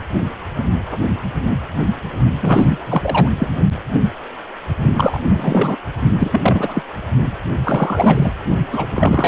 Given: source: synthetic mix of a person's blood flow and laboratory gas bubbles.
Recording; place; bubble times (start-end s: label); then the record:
Doppler ultrasound of blood flow; precordium
2.41-3.29 s: bubbles
3.38-3.48 s: bubbles
4.96-5.19 s: bubbles
5.23-5.76 s: bubbles
6.19-6.83 s: bubbles
7.63-8.32 s: bubbles
8.72-8.87 s: bubbles
8.91-9.28 s: bubbles
From the record:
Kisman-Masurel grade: 333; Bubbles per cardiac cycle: rolling drumbeat, 9 or more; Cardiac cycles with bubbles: 50 to 99%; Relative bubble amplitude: loud (0.450 to 0.775); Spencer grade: 3 (all of the cardiac periods contain showers or single bubble signals, but not dominating or overriding the cardiac motion signals); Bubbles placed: only in the low amplitude regions of the cardiac cycle